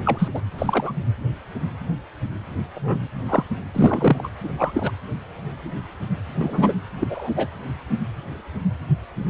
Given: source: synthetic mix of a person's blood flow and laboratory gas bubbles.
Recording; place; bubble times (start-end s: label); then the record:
Doppler ultrasound of blood flow; precordium
0.05-0.29 s: bubbles
0.34-0.41 s: bubbles
0.58-0.91 s: bubbles
2.75-3.08 s: bubbles
3.29-3.44 s: bubbles
3.73-4.28 s: bubbles
4.44-4.49 s: bubbles
4.58-4.91 s: bubbles
6.40-6.73 s: bubbles
7.00-7.07 s: bubbles
7.09-7.29 s: bubbles
7.36-7.48 s: bubbles
From the record:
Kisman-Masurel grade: 232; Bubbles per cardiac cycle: several, 3 to 8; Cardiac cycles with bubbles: 50 to 99%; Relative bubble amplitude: moderate (0.250 to 0.450); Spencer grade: 3 (all of the cardiac periods contain showers or single bubble signals, but not dominating or overriding the cardiac motion signals); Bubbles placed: anywhere in the cardiac cycle